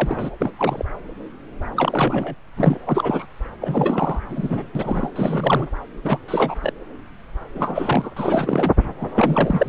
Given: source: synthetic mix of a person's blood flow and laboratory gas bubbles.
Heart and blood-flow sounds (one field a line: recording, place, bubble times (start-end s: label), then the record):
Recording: Doppler ultrasound of blood flow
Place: subclavian vein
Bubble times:
0.00-0.31 s: bubbles
0.41-0.52 s: bubbles
0.57-0.85 s: bubbles
1.76-2.35 s: bubbles
2.56-2.78 s: bubbles
2.85-3.25 s: bubbles
3.61-4.19 s: bubbles
4.29-4.66 s: bubbles
4.75-5.11 s: bubbles
5.15-5.67 s: bubbles
6.03-6.18 s: bubbles
6.27-6.55 s: bubbles
6.62-6.72 s: bubbles
7.54-8.11 s: bubbles
8.16-8.74 s: bubbles
8.99-9.69 s: bubbles
From the record:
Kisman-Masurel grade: 333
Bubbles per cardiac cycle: rolling drumbeat, 9 or more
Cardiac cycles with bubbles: 50 to 99%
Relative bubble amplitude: loud (0.450 to 0.775)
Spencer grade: 3 (all of the cardiac periods contain showers or single bubble signals, but not dominating or overriding the cardiac motion signals)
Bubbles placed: anywhere in the cardiac cycle